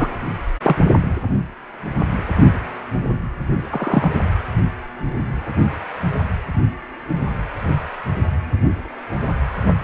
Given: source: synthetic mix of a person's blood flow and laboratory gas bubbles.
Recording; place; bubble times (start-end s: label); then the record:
Doppler ultrasound of blood flow; precordium
0.00-0.08 s: bubbles
0.63-0.76 s: bubbles
3.70-4.10 s: bubbles
From the record:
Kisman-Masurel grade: 123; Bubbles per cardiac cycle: 1 to 2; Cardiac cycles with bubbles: 10 to 50%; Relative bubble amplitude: loud (0.450 to 0.775); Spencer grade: 2 (many but less than half of the cardiac periods contain bubble signals, singularly or in groups); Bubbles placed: anywhere in the cardiac cycle